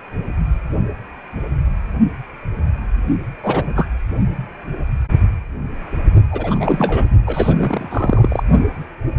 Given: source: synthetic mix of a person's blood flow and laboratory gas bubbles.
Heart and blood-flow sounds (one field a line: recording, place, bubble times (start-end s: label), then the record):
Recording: Doppler ultrasound of blood flow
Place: precordium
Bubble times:
3.42-3.64 s: bubbles
3.76-3.87 s: bubbles
6.30-7.06 s: bubbles
7.26-8.43 s: bubbles
From the record:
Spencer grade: 2 (many but less than half of the cardiac periods contain bubble signals, singularly or in groups)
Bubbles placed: only in the low amplitude regions of the cardiac cycle